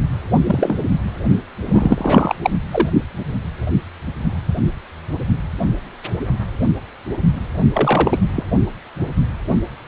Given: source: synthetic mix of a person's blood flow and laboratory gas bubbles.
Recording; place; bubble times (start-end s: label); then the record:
Doppler ultrasound of blood flow; precordium
0.46-0.77 s: bubbles
1.66-2.35 s: bubbles
2.43-2.51 s: bubbles
2.71-2.90 s: bubbles
7.73-8.20 s: bubbles
8.35-8.45 s: bubbles
From the record:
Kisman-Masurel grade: 223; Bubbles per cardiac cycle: several, 3 to 8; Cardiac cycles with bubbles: 10 to 50%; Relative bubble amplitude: loud (0.450 to 0.775); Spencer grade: 2 (many but less than half of the cardiac periods contain bubble signals, singularly or in groups); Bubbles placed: only in the low amplitude regions of the cardiac cycle